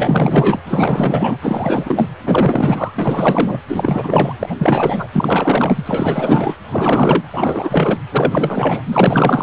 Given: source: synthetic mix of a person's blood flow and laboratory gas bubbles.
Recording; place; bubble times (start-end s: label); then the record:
Doppler ultrasound of blood flow; precordium
0.00-0.59 s: bubbles
0.68-1.36 s: bubbles
1.42-2.06 s: bubbles
2.25-2.92 s: bubbles
2.96-3.57 s: bubbles
3.68-4.33 s: bubbles
4.39-4.55 s: bubbles
4.58-5.08 s: bubbles
5.12-6.55 s: bubbles
6.71-7.23 s: bubbles
7.32-7.99 s: bubbles
8.12-8.82 s: bubbles
8.86-9.43 s: bubbles
From the record:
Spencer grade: 4 (maximum detectable bubble signal sounding continuously throughout systole and diastole of every cardiac period, and overriding the amplitude of the normal cardiac signals); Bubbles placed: anywhere in the cardiac cycle